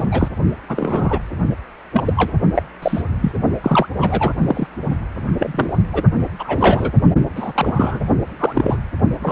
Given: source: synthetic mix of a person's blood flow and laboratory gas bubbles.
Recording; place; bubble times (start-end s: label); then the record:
Doppler ultrasound of blood flow; precordium
0.00-0.03 s: bubbles
0.11-0.28 s: bubbles
0.69-1.19 s: bubbles
1.93-2.13 s: bubbles
2.17-2.33 s: bubbles
2.55-2.63 s: bubbles
2.82-3.02 s: bubbles
3.21-3.31 s: bubbles
3.63-3.87 s: bubbles
4.00-4.33 s: bubbles
4.45-4.67 s: bubbles
5.38-5.75 s: bubbles
5.92-6.03 s: bubbles
6.39-6.92 s: bubbles
7.35-7.52 s: bubbles
7.55-8.00 s: bubbles
8.39-8.78 s: bubbles
9.23-9.31 s: bubbles
From the record:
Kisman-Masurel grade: 233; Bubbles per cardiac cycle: several, 3 to 8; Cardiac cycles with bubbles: 50 to 99%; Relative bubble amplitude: loud (0.450 to 0.775); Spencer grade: 3 (all of the cardiac periods contain showers or single bubble signals, but not dominating or overriding the cardiac motion signals); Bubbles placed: only in the low amplitude regions of the cardiac cycle